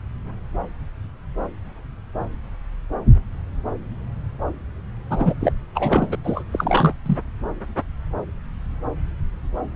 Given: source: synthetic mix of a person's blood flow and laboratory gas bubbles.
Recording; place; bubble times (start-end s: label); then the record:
Doppler ultrasound of blood flow; subclavian vein
5.11-5.34 s: bubbles
5.41-5.53 s: bubbles
5.75-6.17 s: bubbles
6.24-6.43 s: bubbles
6.52-6.93 s: bubbles
7.06-7.17 s: bubbles
From the record:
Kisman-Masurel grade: 222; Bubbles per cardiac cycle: several, 3 to 8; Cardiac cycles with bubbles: 10 to 50%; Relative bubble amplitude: moderate (0.250 to 0.450); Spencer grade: 2 (many but less than half of the cardiac periods contain bubble signals, singularly or in groups); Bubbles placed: anywhere in the cardiac cycle